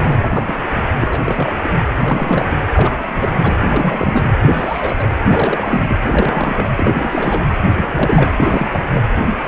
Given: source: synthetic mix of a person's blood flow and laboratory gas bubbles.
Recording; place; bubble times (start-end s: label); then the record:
Doppler ultrasound of blood flow; precordium
0.00-0.84 s: bubbles
1.01-1.21 s: bubbles
1.25-1.59 s: bubbles
1.64-1.69 s: bubbles
2.00-2.57 s: bubbles
2.72-2.96 s: bubbles
3.08-3.58 s: bubbles
3.64-4.38 s: bubbles
4.41-5.07 s: bubbles
5.26-5.97 s: bubbles
6.06-6.67 s: bubbles
6.76-7.47 s: bubbles
7.76-7.89 s: bubbles
7.91-8.31 s: bubbles
8.37-8.68 s: bubbles
8.71-8.82 s: bubbles
8.94-9.05 s: bubbles
From the record:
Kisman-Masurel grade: 342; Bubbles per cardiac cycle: rolling drumbeat, 9 or more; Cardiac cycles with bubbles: 100%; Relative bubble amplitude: moderate (0.250 to 0.450); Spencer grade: 3 (all of the cardiac periods contain showers or single bubble signals, but not dominating or overriding the cardiac motion signals); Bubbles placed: anywhere in the cardiac cycle